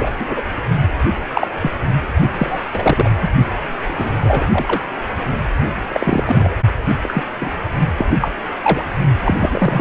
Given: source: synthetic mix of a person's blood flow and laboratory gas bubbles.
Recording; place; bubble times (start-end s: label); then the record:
Doppler ultrasound of blood flow; precordium
0.00-0.12 s: bubbles
0.19-0.42 s: bubbles
1.34-1.47 s: bubbles
1.59-1.71 s: bubbles
2.34-2.71 s: bubbles
2.73-3.10 s: bubbles
3.21-3.28 s: bubbles
3.87-4.48 s: bubbles
4.52-4.80 s: bubbles
5.93-6.54 s: bubbles
7.03-7.23 s: bubbles
7.41-7.51 s: bubbles
7.97-8.06 s: bubbles
8.21-8.29 s: bubbles
8.63-8.84 s: bubbles
9.24-9.81 s: bubbles
From the record:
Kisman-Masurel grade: 243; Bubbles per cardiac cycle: several, 3 to 8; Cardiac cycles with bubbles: 100%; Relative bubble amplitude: loud (0.450 to 0.775); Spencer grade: 3 (all of the cardiac periods contain showers or single bubble signals, but not dominating or overriding the cardiac motion signals); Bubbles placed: only in the low amplitude regions of the cardiac cycle